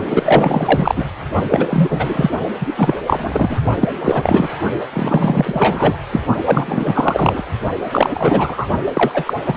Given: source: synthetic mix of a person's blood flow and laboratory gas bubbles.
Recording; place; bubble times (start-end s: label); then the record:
Doppler ultrasound of blood flow; precordium
0.09-1.06 s: bubbles
1.50-1.67 s: bubbles
1.70-2.30 s: bubbles
2.59-2.96 s: bubbles
3.06-3.60 s: bubbles
3.79-3.88 s: bubbles
4.04-4.48 s: bubbles
4.93-6.02 s: bubbles
6.12-6.21 s: bubbles
6.45-7.43 s: bubbles
7.91-8.66 s: bubbles
8.86-9.12 s: bubbles
9.14-9.33 s: bubbles
9.46-9.56 s: bubbles
From the record:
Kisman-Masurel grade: 343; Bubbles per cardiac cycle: rolling drumbeat, 9 or more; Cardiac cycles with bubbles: 100%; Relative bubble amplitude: loud (0.450 to 0.775); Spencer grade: 3 (all of the cardiac periods contain showers or single bubble signals, but not dominating or overriding the cardiac motion signals); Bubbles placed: only in the low amplitude regions of the cardiac cycle